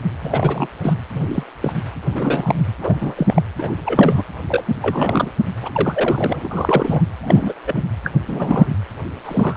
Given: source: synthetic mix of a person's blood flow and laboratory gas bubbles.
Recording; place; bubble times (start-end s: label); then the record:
Doppler ultrasound of blood flow; precordium
0.21-0.68 s: bubbles
0.82-0.94 s: bubbles
1.13-1.44 s: bubbles
1.62-1.73 s: bubbles
2.07-2.62 s: bubbles
2.80-3.42 s: bubbles
3.59-3.76 s: bubbles
3.85-4.23 s: bubbles
4.46-4.63 s: bubbles
4.82-5.29 s: bubbles
5.62-7.03 s: bubbles
7.23-7.53 s: bubbles
7.67-7.83 s: bubbles
8.04-8.11 s: bubbles
8.27-8.71 s: bubbles
9.25-9.57 s: bubbles
From the record:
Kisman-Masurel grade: 242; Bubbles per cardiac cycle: several, 3 to 8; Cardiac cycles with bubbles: 100%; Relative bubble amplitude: moderate (0.250 to 0.450); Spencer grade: 3 (all of the cardiac periods contain showers or single bubble signals, but not dominating or overriding the cardiac motion signals); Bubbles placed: anywhere in the cardiac cycle